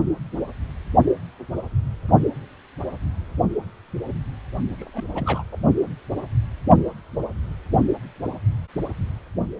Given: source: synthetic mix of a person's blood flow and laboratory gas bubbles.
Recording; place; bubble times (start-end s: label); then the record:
Doppler ultrasound of blood flow; precordium
4.78-4.90 s: bubbles
4.93-5.08 s: bubbles
5.15-5.43 s: bubbles
5.52-5.57 s: bubbles
From the record:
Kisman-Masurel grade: 211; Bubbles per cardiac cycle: several, 3 to 8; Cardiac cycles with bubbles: 1 to 10%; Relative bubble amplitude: barely perceptible (0.100 to 0.250); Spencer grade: 1 (occasional bubble signal discernible with the cardiac motion signal, with majority of cardiac periods free of bubbles); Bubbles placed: only in the low amplitude regions of the cardiac cycle